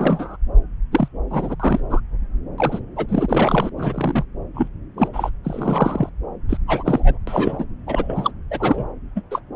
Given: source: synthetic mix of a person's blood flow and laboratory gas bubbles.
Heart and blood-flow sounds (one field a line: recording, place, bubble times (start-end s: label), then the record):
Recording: Doppler ultrasound of blood flow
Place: subclavian vein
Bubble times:
0.00-0.36 s: bubbles
0.91-1.08 s: bubbles
1.29-1.56 s: bubbles
1.60-1.80 s: bubbles
1.90-2.00 s: bubbles
2.58-2.79 s: bubbles
2.96-3.06 s: bubbles
3.08-3.70 s: bubbles
3.77-4.25 s: bubbles
4.54-4.68 s: bubbles
4.97-5.08 s: bubbles
5.13-5.30 s: bubbles
5.44-6.09 s: bubbles
6.49-6.57 s: bubbles
6.67-7.18 s: bubbles
7.27-7.65 s: bubbles
7.87-8.31 s: bubbles
8.50-8.86 s: bubbles
9.15-9.22 s: bubbles
9.30-9.40 s: bubbles
From the record:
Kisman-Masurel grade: 243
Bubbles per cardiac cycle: several, 3 to 8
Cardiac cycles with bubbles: 100%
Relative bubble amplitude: loud (0.450 to 0.775)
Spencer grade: 3 (all of the cardiac periods contain showers or single bubble signals, but not dominating or overriding the cardiac motion signals)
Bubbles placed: anywhere in the cardiac cycle